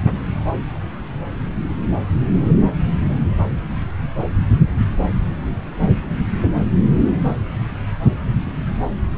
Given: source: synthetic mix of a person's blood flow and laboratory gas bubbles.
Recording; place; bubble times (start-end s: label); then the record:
Doppler ultrasound of blood flow; subclavian vein
no bubbles
From the record:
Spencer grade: 0 (complete lack of bubble signals)